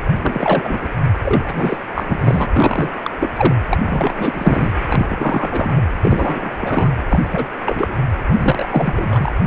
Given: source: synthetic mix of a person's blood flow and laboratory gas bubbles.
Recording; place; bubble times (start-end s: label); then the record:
Doppler ultrasound of blood flow; precordium
0.21-0.90 s: bubbles
1.24-1.78 s: bubbles
1.94-2.46 s: bubbles
2.53-2.90 s: bubbles
3.03-3.10 s: bubbles
3.20-3.29 s: bubbles
3.35-3.54 s: bubbles
3.70-3.78 s: bubbles
3.82-4.72 s: bubbles
4.88-5.82 s: bubbles
6.02-6.92 s: bubbles
7.09-7.20 s: bubbles
7.32-7.46 s: bubbles
7.65-7.96 s: bubbles
8.27-9.31 s: bubbles
From the record:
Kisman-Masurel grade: 343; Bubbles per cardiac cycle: rolling drumbeat, 9 or more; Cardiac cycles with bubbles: 100%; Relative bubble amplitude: loud (0.450 to 0.775); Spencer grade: 3 (all of the cardiac periods contain showers or single bubble signals, but not dominating or overriding the cardiac motion signals); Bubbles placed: anywhere in the cardiac cycle